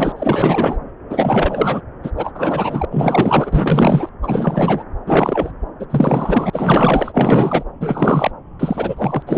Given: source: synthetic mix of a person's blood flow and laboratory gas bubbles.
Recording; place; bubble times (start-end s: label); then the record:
Doppler ultrasound of blood flow; subclavian vein
0.00-0.12 s: bubbles
0.16-0.77 s: bubbles
1.09-1.81 s: bubbles
2.03-2.10 s: bubbles
2.17-2.31 s: bubbles
2.34-2.85 s: bubbles
2.90-4.09 s: bubbles
4.22-4.83 s: bubbles
5.06-5.51 s: bubbles
5.79-5.86 s: bubbles
5.89-6.50 s: bubbles
6.52-7.63 s: bubbles
7.80-8.31 s: bubbles
8.60-9.23 s: bubbles
9.27-9.38 s: bubbles
From the record:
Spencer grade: 4 (maximum detectable bubble signal sounding continuously throughout systole and diastole of every cardiac period, and overriding the amplitude of the normal cardiac signals); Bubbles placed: anywhere in the cardiac cycle